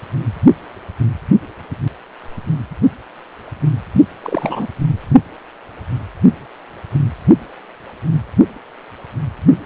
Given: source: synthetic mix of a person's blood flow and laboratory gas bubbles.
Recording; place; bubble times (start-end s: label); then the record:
Doppler ultrasound of blood flow; precordium
3.94-4.01 s: bubbles
4.23-4.67 s: bubbles
From the record:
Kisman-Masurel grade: 212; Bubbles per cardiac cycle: several, 3 to 8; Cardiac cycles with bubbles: 1 to 10%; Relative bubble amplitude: moderate (0.250 to 0.450); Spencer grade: 1 (occasional bubble signal discernible with the cardiac motion signal, with majority of cardiac periods free of bubbles); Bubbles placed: anywhere in the cardiac cycle